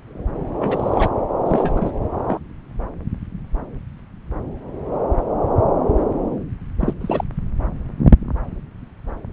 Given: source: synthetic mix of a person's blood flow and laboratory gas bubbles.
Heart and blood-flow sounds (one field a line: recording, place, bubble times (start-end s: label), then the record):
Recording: Doppler ultrasound of blood flow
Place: subclavian vein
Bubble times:
0.58-1.10 s: bubbles
1.46-1.91 s: bubbles
2.28-2.39 s: bubbles
6.79-6.94 s: bubbles
7.01-7.24 s: bubbles
From the record:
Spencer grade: 2 (many but less than half of the cardiac periods contain bubble signals, singularly or in groups)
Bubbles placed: anywhere in the cardiac cycle